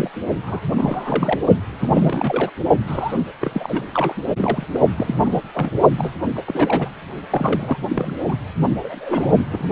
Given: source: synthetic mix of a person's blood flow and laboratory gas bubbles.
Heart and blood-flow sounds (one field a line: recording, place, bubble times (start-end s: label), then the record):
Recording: Doppler ultrasound of blood flow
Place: precordium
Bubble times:
0.00-0.11 s: bubbles
0.43-0.61 s: bubbles
0.77-1.40 s: bubbles
1.79-2.50 s: bubbles
2.88-3.14 s: bubbles
3.41-3.83 s: bubbles
3.93-4.15 s: bubbles
4.37-4.65 s: bubbles
4.72-4.80 s: bubbles
4.97-5.16 s: bubbles
5.25-5.42 s: bubbles
5.53-5.71 s: bubbles
5.98-6.11 s: bubbles
6.33-6.88 s: bubbles
7.30-7.78 s: bubbles
7.81-7.87 s: bubbles
7.89-8.15 s: bubbles
8.28-8.35 s: bubbles
8.83-9.33 s: bubbles
9.50-9.65 s: bubbles
From the record:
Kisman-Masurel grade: 342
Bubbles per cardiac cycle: rolling drumbeat, 9 or more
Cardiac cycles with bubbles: 100%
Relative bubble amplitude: moderate (0.250 to 0.450)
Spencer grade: 3 (all of the cardiac periods contain showers or single bubble signals, but not dominating or overriding the cardiac motion signals)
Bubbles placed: only in the low amplitude regions of the cardiac cycle